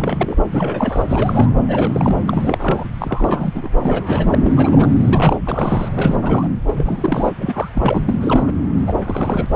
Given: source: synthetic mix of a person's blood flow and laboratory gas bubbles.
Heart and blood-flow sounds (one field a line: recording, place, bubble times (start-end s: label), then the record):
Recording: Doppler ultrasound of blood flow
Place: subclavian vein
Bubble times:
0.00-0.36 s: bubbles
0.51-1.06 s: bubbles
1.08-1.50 s: bubbles
1.68-2.16 s: bubbles
2.27-2.84 s: bubbles
2.99-3.72 s: bubbles
3.78-4.35 s: bubbles
4.42-4.53 s: bubbles
4.57-4.90 s: bubbles
4.99-5.37 s: bubbles
5.46-5.89 s: bubbles
5.96-6.16 s: bubbles
6.22-6.49 s: bubbles
6.67-7.32 s: bubbles
7.39-7.67 s: bubbles
7.74-8.03 s: bubbles
8.07-8.51 s: bubbles
8.87-8.93 s: bubbles
8.98-9.46 s: bubbles
From the record:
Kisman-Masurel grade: 342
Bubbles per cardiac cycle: rolling drumbeat, 9 or more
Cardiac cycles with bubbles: 100%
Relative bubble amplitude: moderate (0.250 to 0.450)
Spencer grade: 3 (all of the cardiac periods contain showers or single bubble signals, but not dominating or overriding the cardiac motion signals)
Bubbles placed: anywhere in the cardiac cycle